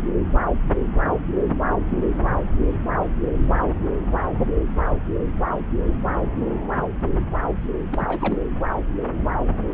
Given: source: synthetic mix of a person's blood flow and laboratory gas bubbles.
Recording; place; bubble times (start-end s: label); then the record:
Doppler ultrasound of blood flow; subclavian vein
7.91-8.37 s: bubbles
From the record:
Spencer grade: 1 (occasional bubble signal discernible with the cardiac motion signal, with majority of cardiac periods free of bubbles); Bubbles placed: anywhere in the cardiac cycle